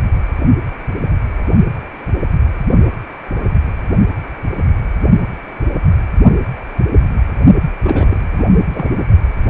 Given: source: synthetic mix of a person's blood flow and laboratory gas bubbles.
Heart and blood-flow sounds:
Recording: Doppler ultrasound of blood flow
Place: precordium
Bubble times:
7.82-8.21 s: bubbles
8.30-8.46 s: bubbles
8.72-8.91 s: bubbles
8.96-9.05 s: bubbles
From the record:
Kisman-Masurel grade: 222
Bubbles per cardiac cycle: several, 3 to 8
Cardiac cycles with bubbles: 10 to 50%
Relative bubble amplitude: moderate (0.250 to 0.450)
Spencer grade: 2 (many but less than half of the cardiac periods contain bubble signals, singularly or in groups)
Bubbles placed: only in the low amplitude regions of the cardiac cycle

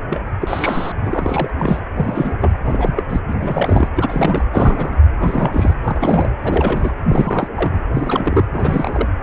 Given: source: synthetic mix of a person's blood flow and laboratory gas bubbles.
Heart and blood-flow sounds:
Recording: Doppler ultrasound of blood flow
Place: precordium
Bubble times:
0.10-0.22 s: bubbles
0.41-0.92 s: bubbles
1.02-1.50 s: bubbles
1.58-1.79 s: bubbles
1.96-2.33 s: bubbles
2.40-2.51 s: bubbles
2.64-3.03 s: bubbles
3.08-3.20 s: bubbles
3.27-3.33 s: bubbles
3.38-3.88 s: bubbles
3.96-4.44 s: bubbles
4.53-5.01 s: bubbles
5.16-5.74 s: bubbles
5.84-6.30 s: bubbles
6.43-6.91 s: bubbles
7.08-7.48 s: bubbles
7.54-7.81 s: bubbles
7.92-8.45 s: bubbles
8.52-9.09 s: bubbles
From the record:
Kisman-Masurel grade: 342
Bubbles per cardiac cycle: rolling drumbeat, 9 or more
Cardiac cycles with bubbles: 100%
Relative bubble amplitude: moderate (0.250 to 0.450)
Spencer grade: 3 (all of the cardiac periods contain showers or single bubble signals, but not dominating or overriding the cardiac motion signals)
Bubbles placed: anywhere in the cardiac cycle

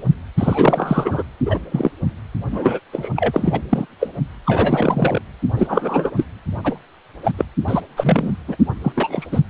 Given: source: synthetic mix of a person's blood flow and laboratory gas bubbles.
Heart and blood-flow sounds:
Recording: Doppler ultrasound of blood flow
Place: precordium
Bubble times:
0.38-1.23 s: bubbles
1.45-1.58 s: bubbles
1.72-1.91 s: bubbles
2.51-2.80 s: bubbles
2.92-3.10 s: bubbles
3.16-3.60 s: bubbles
3.69-3.86 s: bubbles
4.00-4.10 s: bubbles
4.46-5.21 s: bubbles
5.57-6.11 s: bubbles
6.17-6.25 s: bubbles
6.63-6.78 s: bubbles
7.24-7.32 s: bubbles
7.38-7.45 s: bubbles
7.67-7.81 s: bubbles
7.97-8.33 s: bubbles
8.47-8.57 s: bubbles
8.83-8.92 s: bubbles
8.96-9.26 s: bubbles
9.31-9.40 s: bubbles
From the record:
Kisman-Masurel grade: 243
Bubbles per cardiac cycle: several, 3 to 8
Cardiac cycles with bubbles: 100%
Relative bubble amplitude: loud (0.450 to 0.775)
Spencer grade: 3 (all of the cardiac periods contain showers or single bubble signals, but not dominating or overriding the cardiac motion signals)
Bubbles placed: anywhere in the cardiac cycle

